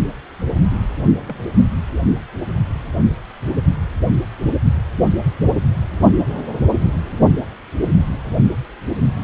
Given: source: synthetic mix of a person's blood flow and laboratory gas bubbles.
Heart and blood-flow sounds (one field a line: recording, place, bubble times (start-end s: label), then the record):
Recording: Doppler ultrasound of blood flow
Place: precordium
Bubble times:
0.63-0.81 s: bubbles
1.18-1.43 s: bubbles
From the record:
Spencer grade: 2 (many but less than half of the cardiac periods contain bubble signals, singularly or in groups)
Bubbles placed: only in the low amplitude regions of the cardiac cycle